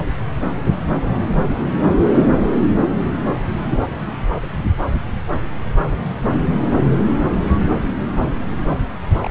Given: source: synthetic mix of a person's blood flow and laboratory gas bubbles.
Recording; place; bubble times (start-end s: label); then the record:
Doppler ultrasound of blood flow; subclavian vein
9.23-9.28 s: bubbles
From the record:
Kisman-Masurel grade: 111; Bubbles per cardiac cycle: 1 to 2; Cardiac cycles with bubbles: 1 to 10%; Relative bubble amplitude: barely perceptible (0.100 to 0.250); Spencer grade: 1 (occasional bubble signal discernible with the cardiac motion signal, with majority of cardiac periods free of bubbles); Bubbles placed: anywhere in the cardiac cycle